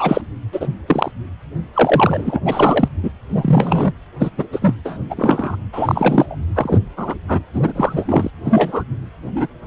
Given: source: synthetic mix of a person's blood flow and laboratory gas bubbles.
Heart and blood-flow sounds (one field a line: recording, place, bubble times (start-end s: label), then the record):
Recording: Doppler ultrasound of blood flow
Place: precordium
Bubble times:
0.00-0.22 s: bubbles
0.52-0.68 s: bubbles
0.88-1.11 s: bubbles
1.73-2.40 s: bubbles
2.45-2.88 s: bubbles
3.02-3.10 s: bubbles
3.34-3.92 s: bubbles
4.19-4.30 s: bubbles
4.37-4.47 s: bubbles
4.52-4.75 s: bubbles
4.85-4.98 s: bubbles
5.10-5.56 s: bubbles
5.73-6.35 s: bubbles
6.55-6.79 s: bubbles
6.96-7.15 s: bubbles
7.28-7.40 s: bubbles
7.54-8.30 s: bubbles
8.44-8.84 s: bubbles
9.36-9.47 s: bubbles
From the record:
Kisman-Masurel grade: 243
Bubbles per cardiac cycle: several, 3 to 8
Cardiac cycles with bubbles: 100%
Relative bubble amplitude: loud (0.450 to 0.775)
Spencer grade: 3 (all of the cardiac periods contain showers or single bubble signals, but not dominating or overriding the cardiac motion signals)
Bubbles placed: anywhere in the cardiac cycle